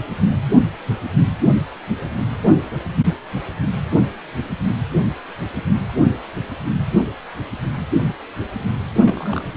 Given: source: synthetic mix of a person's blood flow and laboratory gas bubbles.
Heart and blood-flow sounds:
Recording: Doppler ultrasound of blood flow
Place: precordium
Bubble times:
9.01-9.57 s: bubbles
From the record:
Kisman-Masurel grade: 112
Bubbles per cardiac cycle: 1 to 2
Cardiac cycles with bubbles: 1 to 10%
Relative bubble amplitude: moderate (0.250 to 0.450)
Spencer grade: 1 (occasional bubble signal discernible with the cardiac motion signal, with majority of cardiac periods free of bubbles)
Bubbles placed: anywhere in the cardiac cycle

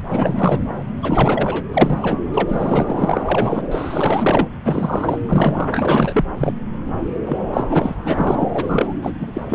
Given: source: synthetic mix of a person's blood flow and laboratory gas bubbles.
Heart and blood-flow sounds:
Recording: Doppler ultrasound of blood flow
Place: subclavian vein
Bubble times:
0.08-0.60 s: bubbles
1.02-1.65 s: bubbles
1.73-2.19 s: bubbles
2.33-3.62 s: bubbles
3.71-4.48 s: bubbles
4.65-5.21 s: bubbles
5.27-5.69 s: bubbles
5.72-6.25 s: bubbles
6.38-6.53 s: bubbles
7.26-7.40 s: bubbles
7.53-7.64 s: bubbles
7.69-7.95 s: bubbles
8.04-8.95 s: bubbles
9.01-9.13 s: bubbles
9.20-9.43 s: bubbles
9.48-9.55 s: bubbles
From the record:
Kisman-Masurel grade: 444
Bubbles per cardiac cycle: continuous sound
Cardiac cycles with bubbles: 100%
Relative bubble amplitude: maximal (0.775 to 0.999)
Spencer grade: 4 (maximum detectable bubble signal sounding continuously throughout systole and diastole of every cardiac period, and overriding the amplitude of the normal cardiac signals)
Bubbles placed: anywhere in the cardiac cycle

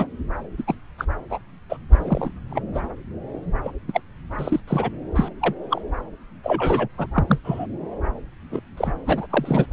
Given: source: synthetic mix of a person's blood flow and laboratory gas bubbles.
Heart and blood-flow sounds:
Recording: Doppler ultrasound of blood flow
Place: subclavian vein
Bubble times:
0.00-0.07 s: bubbles
0.57-0.63 s: bubbles
0.67-0.75 s: bubbles
0.98-1.04 s: bubbles
1.29-1.39 s: bubbles
1.69-1.78 s: bubbles
1.93-2.40 s: bubbles
2.50-2.62 s: bubbles
2.74-2.81 s: bubbles
3.64-3.72 s: bubbles
3.88-4.01 s: bubbles
4.38-4.60 s: bubbles
4.67-4.90 s: bubbles
5.15-5.29 s: bubbles
5.41-5.54 s: bubbles
5.69-5.81 s: bubbles
6.43-6.88 s: bubbles
6.97-7.07 s: bubbles
7.14-7.25 s: bubbles
7.27-7.39 s: bubbles
7.44-7.67 s: bubbles
8.51-8.61 s: bubbles
8.77-8.92 s: bubbles
9.05-9.27 s: bubbles
9.29-9.66 s: bubbles
From the record:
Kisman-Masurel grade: 242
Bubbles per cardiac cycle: several, 3 to 8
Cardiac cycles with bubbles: 100%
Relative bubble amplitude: moderate (0.250 to 0.450)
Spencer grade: 3 (all of the cardiac periods contain showers or single bubble signals, but not dominating or overriding the cardiac motion signals)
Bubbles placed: anywhere in the cardiac cycle

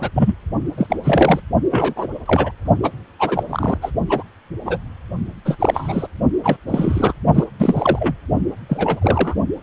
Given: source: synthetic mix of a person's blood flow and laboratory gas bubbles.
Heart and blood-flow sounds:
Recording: Doppler ultrasound of blood flow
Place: precordium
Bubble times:
0.00-0.10 s: bubbles
0.15-0.35 s: bubbles
0.77-0.86 s: bubbles
0.90-0.97 s: bubbles
1.03-1.40 s: bubbles
1.71-1.93 s: bubbles
1.96-2.08 s: bubbles
2.25-2.51 s: bubbles
2.83-2.91 s: bubbles
3.19-3.43 s: bubbles
3.50-3.77 s: bubbles
3.82-3.91 s: bubbles
4.08-4.23 s: bubbles
4.65-4.77 s: bubbles
5.44-5.56 s: bubbles
5.59-6.08 s: bubbles
6.43-6.57 s: bubbles
6.67-7.13 s: bubbles
7.34-7.44 s: bubbles
7.58-8.15 s: bubbles
8.69-9.34 s: bubbles
From the record:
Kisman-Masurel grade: 243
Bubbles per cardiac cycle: several, 3 to 8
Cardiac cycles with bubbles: 100%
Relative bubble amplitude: loud (0.450 to 0.775)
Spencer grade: 3 (all of the cardiac periods contain showers or single bubble signals, but not dominating or overriding the cardiac motion signals)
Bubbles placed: only in the low amplitude regions of the cardiac cycle

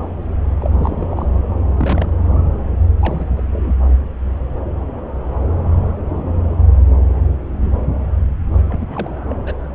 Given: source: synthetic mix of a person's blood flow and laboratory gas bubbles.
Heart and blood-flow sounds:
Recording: Doppler ultrasound of blood flow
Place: subclavian vein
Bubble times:
0.60-1.08 s: bubbles
1.11-1.26 s: bubbles
1.78-2.19 s: bubbles
3.00-3.26 s: bubbles
3.36-3.42 s: bubbles
3.51-3.74 s: bubbles
8.68-9.14 s: bubbles
9.29-9.36 s: bubbles
9.46-9.53 s: bubbles
From the record:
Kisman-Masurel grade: 221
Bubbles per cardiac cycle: several, 3 to 8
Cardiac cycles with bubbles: 10 to 50%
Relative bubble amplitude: barely perceptible (0.100 to 0.250)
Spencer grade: 2 (many but less than half of the cardiac periods contain bubble signals, singularly or in groups)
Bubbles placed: anywhere in the cardiac cycle

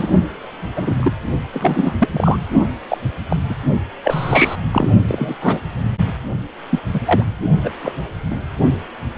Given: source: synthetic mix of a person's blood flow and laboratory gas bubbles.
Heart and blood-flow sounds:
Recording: Doppler ultrasound of blood flow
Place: precordium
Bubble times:
0.00-0.11 s: bubbles
0.76-0.95 s: bubbles
1.00-1.12 s: bubbles
1.52-1.96 s: bubbles
1.98-2.08 s: bubbles
2.13-2.39 s: bubbles
2.88-2.98 s: bubbles
3.29-3.37 s: bubbles
3.49-3.55 s: bubbles
4.04-4.55 s: bubbles
4.71-4.88 s: bubbles
5.07-5.35 s: bubbles
5.40-5.61 s: bubbles
6.70-6.79 s: bubbles
6.93-7.00 s: bubbles
7.05-7.22 s: bubbles
7.63-7.70 s: bubbles
7.82-7.92 s: bubbles
8.30-8.36 s: bubbles
9.16-9.18 s: bubbles
From the record:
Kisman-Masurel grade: 243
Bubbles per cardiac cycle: several, 3 to 8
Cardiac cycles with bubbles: 100%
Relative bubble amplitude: loud (0.450 to 0.775)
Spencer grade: 3 (all of the cardiac periods contain showers or single bubble signals, but not dominating or overriding the cardiac motion signals)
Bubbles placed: only in the low amplitude regions of the cardiac cycle

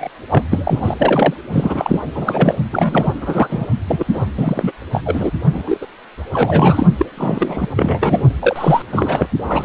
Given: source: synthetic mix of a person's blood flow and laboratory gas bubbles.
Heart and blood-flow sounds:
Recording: Doppler ultrasound of blood flow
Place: precordium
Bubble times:
0.00-0.08 s: bubbles
0.30-0.43 s: bubbles
0.51-0.94 s: bubbles
0.99-1.34 s: bubbles
1.52-2.00 s: bubbles
2.15-2.58 s: bubbles
2.71-3.13 s: bubbles
3.21-3.68 s: bubbles
3.87-4.05 s: bubbles
4.12-4.29 s: bubbles
4.37-4.72 s: bubbles
4.92-5.02 s: bubbles
5.05-5.31 s: bubbles
5.54-5.63 s: bubbles
5.67-5.86 s: bubbles
6.32-6.87 s: bubbles
6.99-7.06 s: bubbles
7.17-7.67 s: bubbles
7.76-8.29 s: bubbles
8.41-8.82 s: bubbles
8.90-9.27 s: bubbles
9.46-9.65 s: bubbles
From the record:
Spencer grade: 3 (all of the cardiac periods contain showers or single bubble signals, but not dominating or overriding the cardiac motion signals)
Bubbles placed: anywhere in the cardiac cycle

